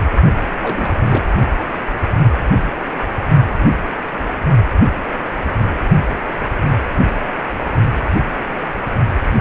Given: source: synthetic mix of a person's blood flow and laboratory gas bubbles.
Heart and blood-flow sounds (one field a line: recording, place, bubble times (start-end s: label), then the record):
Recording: Doppler ultrasound of blood flow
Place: precordium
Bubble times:
0.62-0.91 s: bubbles
0.95-1.23 s: bubbles
From the record:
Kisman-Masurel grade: 211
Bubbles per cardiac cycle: several, 3 to 8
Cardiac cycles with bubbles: 1 to 10%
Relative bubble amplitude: barely perceptible (0.100 to 0.250)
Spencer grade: 1 (occasional bubble signal discernible with the cardiac motion signal, with majority of cardiac periods free of bubbles)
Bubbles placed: only in the low amplitude regions of the cardiac cycle